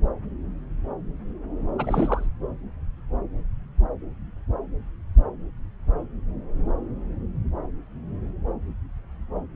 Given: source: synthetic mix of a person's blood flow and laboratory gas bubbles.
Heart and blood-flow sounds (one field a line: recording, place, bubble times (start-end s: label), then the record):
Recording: Doppler ultrasound of blood flow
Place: subclavian vein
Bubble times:
1.78-2.27 s: bubbles
From the record:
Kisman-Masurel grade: 211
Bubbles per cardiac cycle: several, 3 to 8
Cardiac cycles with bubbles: 1 to 10%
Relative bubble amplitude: barely perceptible (0.100 to 0.250)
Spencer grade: 1 (occasional bubble signal discernible with the cardiac motion signal, with majority of cardiac periods free of bubbles)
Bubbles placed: anywhere in the cardiac cycle